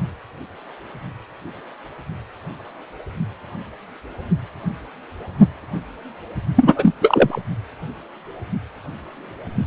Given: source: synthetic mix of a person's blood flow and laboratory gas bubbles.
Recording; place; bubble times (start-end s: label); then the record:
Doppler ultrasound of blood flow; precordium
6.55-6.94 s: bubbles
7.01-7.40 s: bubbles
From the record:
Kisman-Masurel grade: 213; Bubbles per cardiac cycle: several, 3 to 8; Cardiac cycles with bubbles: 1 to 10%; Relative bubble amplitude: loud (0.450 to 0.775); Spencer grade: 1 (occasional bubble signal discernible with the cardiac motion signal, with majority of cardiac periods free of bubbles); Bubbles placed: anywhere in the cardiac cycle